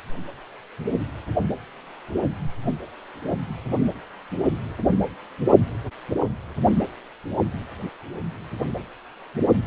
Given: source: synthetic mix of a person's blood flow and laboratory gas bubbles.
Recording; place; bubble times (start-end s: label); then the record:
Doppler ultrasound of blood flow; precordium
no bubbles
From the record:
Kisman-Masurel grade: 000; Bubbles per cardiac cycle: 0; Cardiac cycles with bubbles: 0%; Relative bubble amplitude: no bubbles discernible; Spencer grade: 0 (complete lack of bubble signals)